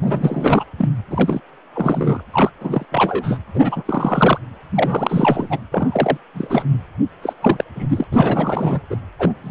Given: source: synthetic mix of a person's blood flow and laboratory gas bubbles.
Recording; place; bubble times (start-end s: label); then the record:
Doppler ultrasound of blood flow; precordium
0.00-0.64 s: bubbles
0.77-0.89 s: bubbles
1.10-1.40 s: bubbles
1.74-2.22 s: bubbles
2.32-2.50 s: bubbles
2.60-2.85 s: bubbles
2.92-3.37 s: bubbles
3.54-3.83 s: bubbles
3.85-4.38 s: bubbles
4.75-5.59 s: bubbles
5.71-6.17 s: bubbles
6.34-6.82 s: bubbles
7.21-7.33 s: bubbles
7.41-7.65 s: bubbles
7.75-7.87 s: bubbles
7.89-8.04 s: bubbles
8.11-8.80 s: bubbles
8.90-8.98 s: bubbles
9.18-9.33 s: bubbles
9.43-9.51 s: bubbles
From the record:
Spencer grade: 3 (all of the cardiac periods contain showers or single bubble signals, but not dominating or overriding the cardiac motion signals); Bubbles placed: anywhere in the cardiac cycle